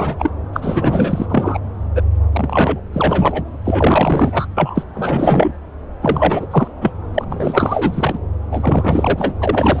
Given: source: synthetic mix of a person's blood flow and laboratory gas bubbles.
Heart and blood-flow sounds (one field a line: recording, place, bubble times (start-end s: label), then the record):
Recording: Doppler ultrasound of blood flow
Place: subclavian vein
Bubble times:
0.00-0.30 s: bubbles
0.53-1.26 s: bubbles
1.29-1.59 s: bubbles
1.95-2.02 s: bubbles
2.33-2.81 s: bubbles
2.93-3.41 s: bubbles
3.64-4.46 s: bubbles
4.56-4.83 s: bubbles
4.94-5.53 s: bubbles
6.01-6.47 s: bubbles
6.51-6.67 s: bubbles
6.81-6.91 s: bubbles
7.14-7.24 s: bubbles
7.29-8.19 s: bubbles
8.51-9.33 s: bubbles
9.40-9.80 s: bubbles
From the record:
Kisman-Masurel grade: 444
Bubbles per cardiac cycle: continuous sound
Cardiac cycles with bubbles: 100%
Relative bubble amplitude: maximal (0.775 to 0.999)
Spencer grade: 4 (maximum detectable bubble signal sounding continuously throughout systole and diastole of every cardiac period, and overriding the amplitude of the normal cardiac signals)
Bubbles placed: anywhere in the cardiac cycle